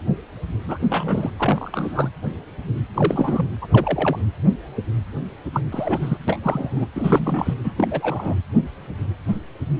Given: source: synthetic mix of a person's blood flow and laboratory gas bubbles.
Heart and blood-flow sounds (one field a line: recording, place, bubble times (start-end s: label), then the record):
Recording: Doppler ultrasound of blood flow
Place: precordium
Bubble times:
0.66-0.78 s: bubbles
0.90-1.30 s: bubbles
1.39-2.09 s: bubbles
2.94-3.46 s: bubbles
3.61-3.68 s: bubbles
3.72-4.17 s: bubbles
5.53-5.61 s: bubbles
5.71-6.17 s: bubbles
6.28-6.38 s: bubbles
6.43-6.86 s: bubbles
6.95-7.54 s: bubbles
7.63-7.73 s: bubbles
7.76-8.36 s: bubbles
From the record:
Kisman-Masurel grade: 232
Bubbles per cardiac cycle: several, 3 to 8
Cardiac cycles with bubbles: 50 to 99%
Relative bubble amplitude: moderate (0.250 to 0.450)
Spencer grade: 3 (all of the cardiac periods contain showers or single bubble signals, but not dominating or overriding the cardiac motion signals)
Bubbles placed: anywhere in the cardiac cycle